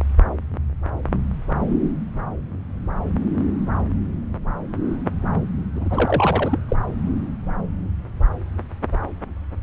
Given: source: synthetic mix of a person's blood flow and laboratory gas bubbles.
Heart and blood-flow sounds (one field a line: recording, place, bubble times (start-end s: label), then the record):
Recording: Doppler ultrasound of blood flow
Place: subclavian vein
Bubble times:
5.75-6.59 s: bubbles
6.68-6.76 s: bubbles
From the record:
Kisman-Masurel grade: 212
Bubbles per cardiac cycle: several, 3 to 8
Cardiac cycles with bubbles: 1 to 10%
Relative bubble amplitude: moderate (0.250 to 0.450)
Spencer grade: 1 (occasional bubble signal discernible with the cardiac motion signal, with majority of cardiac periods free of bubbles)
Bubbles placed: anywhere in the cardiac cycle